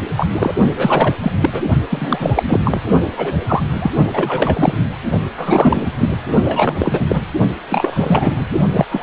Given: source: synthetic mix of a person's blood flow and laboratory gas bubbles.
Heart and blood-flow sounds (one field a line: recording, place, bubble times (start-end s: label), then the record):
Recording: Doppler ultrasound of blood flow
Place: precordium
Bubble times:
0.17-0.27 s: bubbles
0.35-0.52 s: bubbles
0.76-1.15 s: bubbles
1.23-1.32 s: bubbles
1.42-1.50 s: bubbles
1.53-1.61 s: bubbles
1.89-2.59 s: bubbles
2.64-2.80 s: bubbles
3.17-3.37 s: bubbles
3.47-3.62 s: bubbles
3.79-3.91 s: bubbles
4.13-4.77 s: bubbles
5.38-5.91 s: bubbles
5.98-6.16 s: bubbles
6.44-7.23 s: bubbles
7.70-8.46 s: bubbles
8.72-8.85 s: bubbles
8.90-9.03 s: bubbles
From the record:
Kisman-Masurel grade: 343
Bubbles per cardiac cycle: rolling drumbeat, 9 or more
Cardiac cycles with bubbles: 100%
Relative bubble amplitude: loud (0.450 to 0.775)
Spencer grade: 3 (all of the cardiac periods contain showers or single bubble signals, but not dominating or overriding the cardiac motion signals)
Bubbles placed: only in the low amplitude regions of the cardiac cycle